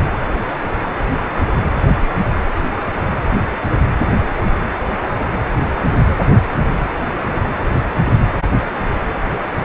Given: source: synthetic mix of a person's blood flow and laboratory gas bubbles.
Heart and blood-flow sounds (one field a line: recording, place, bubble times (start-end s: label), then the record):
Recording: Doppler ultrasound of blood flow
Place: precordium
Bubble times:
no bubbles
From the record:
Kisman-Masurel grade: 000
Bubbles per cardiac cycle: 0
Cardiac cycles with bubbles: 0%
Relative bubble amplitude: no bubbles discernible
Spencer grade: 0 (complete lack of bubble signals)